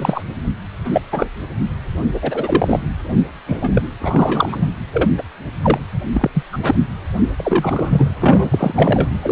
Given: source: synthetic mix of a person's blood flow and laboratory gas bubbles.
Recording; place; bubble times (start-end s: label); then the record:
Doppler ultrasound of blood flow; precordium
0.00-0.22 s: bubbles
0.84-1.02 s: bubbles
1.12-1.28 s: bubbles
2.14-2.79 s: bubbles
3.46-3.81 s: bubbles
3.98-4.70 s: bubbles
4.92-5.10 s: bubbles
5.17-5.22 s: bubbles
5.62-5.78 s: bubbles
6.13-6.30 s: bubbles
6.34-6.43 s: bubbles
6.52-6.58 s: bubbles
6.62-6.74 s: bubbles
7.38-8.15 s: bubbles
8.19-9.09 s: bubbles
9.22-9.32 s: bubbles
From the record:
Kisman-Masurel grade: 243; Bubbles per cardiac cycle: several, 3 to 8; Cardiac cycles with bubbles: 100%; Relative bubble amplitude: loud (0.450 to 0.775); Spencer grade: 3 (all of the cardiac periods contain showers or single bubble signals, but not dominating or overriding the cardiac motion signals); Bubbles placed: anywhere in the cardiac cycle